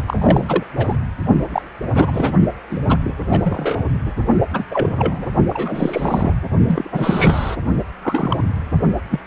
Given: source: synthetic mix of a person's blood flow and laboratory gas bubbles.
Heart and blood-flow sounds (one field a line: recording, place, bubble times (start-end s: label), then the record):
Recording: Doppler ultrasound of blood flow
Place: precordium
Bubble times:
0.07-0.63 s: bubbles
0.77-0.97 s: bubbles
1.52-1.62 s: bubbles
1.95-2.33 s: bubbles
2.71-2.81 s: bubbles
2.89-2.98 s: bubbles
3.00-3.13 s: bubbles
3.29-3.83 s: bubbles
4.05-4.12 s: bubbles
4.53-4.64 s: bubbles
4.71-5.26 s: bubbles
5.50-6.33 s: bubbles
6.67-7.56 s: bubbles
8.01-8.44 s: bubbles
9.10-9.19 s: bubbles
From the record:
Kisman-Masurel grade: 243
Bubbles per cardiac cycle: several, 3 to 8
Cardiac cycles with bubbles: 100%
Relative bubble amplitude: loud (0.450 to 0.775)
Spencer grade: 3 (all of the cardiac periods contain showers or single bubble signals, but not dominating or overriding the cardiac motion signals)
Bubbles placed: only in the low amplitude regions of the cardiac cycle